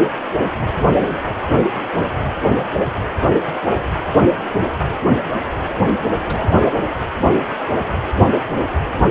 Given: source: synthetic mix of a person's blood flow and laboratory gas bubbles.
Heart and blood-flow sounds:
Doppler ultrasound of blood flow; precordium
6.20-6.56 s: bubbles
6.61-6.65 s: bubbles
From the record:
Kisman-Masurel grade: 211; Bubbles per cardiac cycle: several, 3 to 8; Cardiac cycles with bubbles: 1 to 10%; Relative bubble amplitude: barely perceptible (0.100 to 0.250); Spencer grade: 1 (occasional bubble signal discernible with the cardiac motion signal, with majority of cardiac periods free of bubbles); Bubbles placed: only in the low amplitude regions of the cardiac cycle

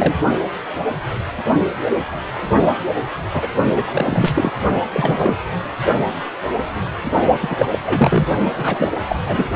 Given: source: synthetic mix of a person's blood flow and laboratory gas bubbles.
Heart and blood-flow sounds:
Doppler ultrasound of blood flow; precordium
0.00-0.15 s: bubbles
3.33-3.49 s: bubbles
3.72-3.85 s: bubbles
3.92-4.52 s: bubbles
4.93-5.36 s: bubbles
7.40-7.78 s: bubbles
7.85-8.26 s: bubbles
8.57-8.90 s: bubbles
8.96-9.00 s: bubbles
9.08-9.16 s: bubbles
9.19-9.48 s: bubbles
From the record:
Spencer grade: 3 (all of the cardiac periods contain showers or single bubble signals, but not dominating or overriding the cardiac motion signals); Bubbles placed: only in the low amplitude regions of the cardiac cycle

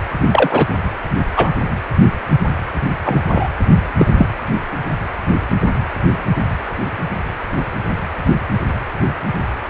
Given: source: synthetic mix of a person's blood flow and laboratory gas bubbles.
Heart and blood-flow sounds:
Doppler ultrasound of blood flow; precordium
0.31-0.66 s: bubbles
1.36-1.49 s: bubbles
3.04-3.21 s: bubbles
3.28-3.48 s: bubbles
3.99-4.07 s: bubbles
4.18-4.28 s: bubbles
From the record:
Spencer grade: 2 (many but less than half of the cardiac periods contain bubble signals, singularly or in groups); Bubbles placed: anywhere in the cardiac cycle

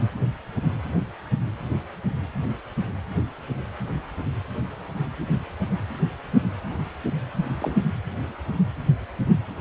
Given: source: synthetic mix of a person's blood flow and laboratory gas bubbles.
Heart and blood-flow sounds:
Doppler ultrasound of blood flow; precordium
0.00-0.02 s: bubbles
7.35-7.45 s: bubbles
7.60-7.75 s: bubbles
From the record:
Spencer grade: 2 (many but less than half of the cardiac periods contain bubble signals, singularly or in groups); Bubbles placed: anywhere in the cardiac cycle

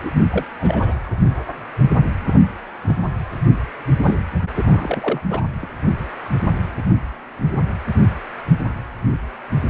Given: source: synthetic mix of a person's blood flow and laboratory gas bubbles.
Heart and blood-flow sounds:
Doppler ultrasound of blood flow; precordium
0.01-0.13 s: bubbles
0.30-0.44 s: bubbles
0.59-0.95 s: bubbles
2.25-2.48 s: bubbles
2.87-2.95 s: bubbles
4.01-4.19 s: bubbles
4.57-5.21 s: bubbles
5.30-5.41 s: bubbles
5.62-5.67 s: bubbles
From the record:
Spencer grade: 2 (many but less than half of the cardiac periods contain bubble signals, singularly or in groups); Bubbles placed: anywhere in the cardiac cycle

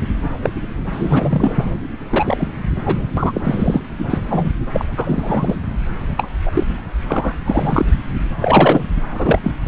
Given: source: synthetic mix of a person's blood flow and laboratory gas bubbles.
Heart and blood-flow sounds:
Doppler ultrasound of blood flow; subclavian vein
0.43-0.49 s: bubbles
0.92-1.75 s: bubbles
2.11-2.50 s: bubbles
2.85-2.99 s: bubbles
3.17-3.41 s: bubbles
3.44-3.80 s: bubbles
3.98-4.05 s: bubbles
4.10-4.18 s: bubbles
4.30-4.51 s: bubbles
4.73-4.85 s: bubbles
4.97-5.56 s: bubbles
6.18-6.29 s: bubbles
6.46-6.64 s: bubbles
7.08-7.37 s: bubbles
7.45-7.86 s: bubbles
8.41-8.85 s: bubbles
9.14-9.39 s: bubbles
9.43-9.52 s: bubbles
9.64-9.68 s: bubbles
From the record:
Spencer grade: 3 (all of the cardiac periods contain showers or single bubble signals, but not dominating or overriding the cardiac motion signals); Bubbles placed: anywhere in the cardiac cycle

